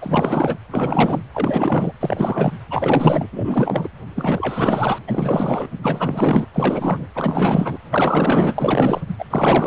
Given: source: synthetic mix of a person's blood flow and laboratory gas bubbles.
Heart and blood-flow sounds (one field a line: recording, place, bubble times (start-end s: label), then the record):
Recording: Doppler ultrasound of blood flow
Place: precordium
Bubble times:
0.01-0.58 s: bubbles
0.71-1.21 s: bubbles
1.34-1.92 s: bubbles
2.00-2.52 s: bubbles
2.70-3.27 s: bubbles
3.32-3.89 s: bubbles
4.15-4.98 s: bubbles
5.07-5.68 s: bubbles
5.82-6.46 s: bubbles
6.53-7.07 s: bubbles
7.15-7.78 s: bubbles
7.90-8.54 s: bubbles
8.56-9.01 s: bubbles
9.18-9.25 s: bubbles
9.30-9.67 s: bubbles
From the record:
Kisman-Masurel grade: 444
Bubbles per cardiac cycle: continuous sound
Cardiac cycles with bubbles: 100%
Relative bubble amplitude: maximal (0.775 to 0.999)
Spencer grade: 4 (maximum detectable bubble signal sounding continuously throughout systole and diastole of every cardiac period, and overriding the amplitude of the normal cardiac signals)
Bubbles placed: anywhere in the cardiac cycle